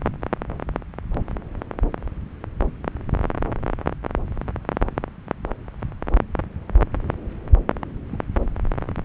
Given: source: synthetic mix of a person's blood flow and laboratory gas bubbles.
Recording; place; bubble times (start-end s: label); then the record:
Doppler ultrasound of blood flow; subclavian vein
8.10-8.18 s: bubbles
From the record:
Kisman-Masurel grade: 121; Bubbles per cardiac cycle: 1 to 2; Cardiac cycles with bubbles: 10 to 50%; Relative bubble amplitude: barely perceptible (0.100 to 0.250); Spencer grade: 2 (many but less than half of the cardiac periods contain bubble signals, singularly or in groups); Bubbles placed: anywhere in the cardiac cycle